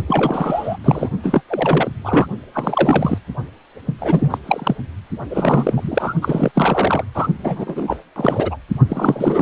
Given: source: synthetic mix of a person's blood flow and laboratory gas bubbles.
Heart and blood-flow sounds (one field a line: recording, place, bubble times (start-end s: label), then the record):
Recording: Doppler ultrasound of blood flow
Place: precordium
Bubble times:
0.07-0.77 s: bubbles
0.83-1.09 s: bubbles
1.23-1.41 s: bubbles
1.49-1.90 s: bubbles
2.04-2.27 s: bubbles
2.54-3.18 s: bubbles
3.98-4.38 s: bubbles
4.44-4.78 s: bubbles
5.30-6.14 s: bubbles
6.21-6.52 s: bubbles
6.54-7.04 s: bubbles
7.14-7.28 s: bubbles
7.38-7.97 s: bubbles
8.16-8.56 s: bubbles
8.88-9.42 s: bubbles
From the record:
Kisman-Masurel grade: 343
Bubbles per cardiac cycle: rolling drumbeat, 9 or more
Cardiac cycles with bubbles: 100%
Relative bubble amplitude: loud (0.450 to 0.775)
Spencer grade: 3 (all of the cardiac periods contain showers or single bubble signals, but not dominating or overriding the cardiac motion signals)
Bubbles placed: only in the low amplitude regions of the cardiac cycle